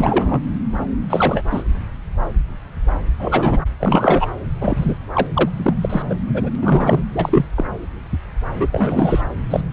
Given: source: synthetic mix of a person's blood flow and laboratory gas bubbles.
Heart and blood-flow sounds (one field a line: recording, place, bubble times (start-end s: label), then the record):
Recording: Doppler ultrasound of blood flow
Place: subclavian vein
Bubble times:
0.00-0.42 s: bubbles
1.09-1.45 s: bubbles
1.50-1.63 s: bubbles
3.19-3.57 s: bubbles
3.79-4.30 s: bubbles
4.61-4.96 s: bubbles
5.13-5.27 s: bubbles
5.33-5.50 s: bubbles
5.57-5.74 s: bubbles
5.81-6.03 s: bubbles
6.10-6.15 s: bubbles
6.28-6.50 s: bubbles
6.55-7.00 s: bubbles
7.12-7.48 s: bubbles
7.56-7.64 s: bubbles
8.54-8.67 s: bubbles
8.72-9.22 s: bubbles
9.50-9.61 s: bubbles
From the record:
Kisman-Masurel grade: 233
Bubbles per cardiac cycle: several, 3 to 8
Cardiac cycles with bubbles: 50 to 99%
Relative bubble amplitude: loud (0.450 to 0.775)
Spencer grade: 3 (all of the cardiac periods contain showers or single bubble signals, but not dominating or overriding the cardiac motion signals)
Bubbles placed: anywhere in the cardiac cycle